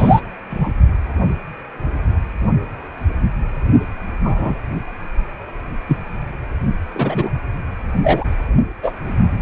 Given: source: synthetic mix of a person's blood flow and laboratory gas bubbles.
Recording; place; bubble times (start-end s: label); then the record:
Doppler ultrasound of blood flow; precordium
0.00-0.21 s: bubbles
0.50-0.72 s: bubbles
4.23-4.55 s: bubbles
5.88-5.97 s: bubbles
6.94-7.29 s: bubbles
8.04-8.24 s: bubbles
8.83-8.94 s: bubbles
From the record:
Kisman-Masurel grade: 123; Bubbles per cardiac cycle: 1 to 2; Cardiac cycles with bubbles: 10 to 50%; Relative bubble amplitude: loud (0.450 to 0.775); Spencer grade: 2 (many but less than half of the cardiac periods contain bubble signals, singularly or in groups); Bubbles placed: only in the low amplitude regions of the cardiac cycle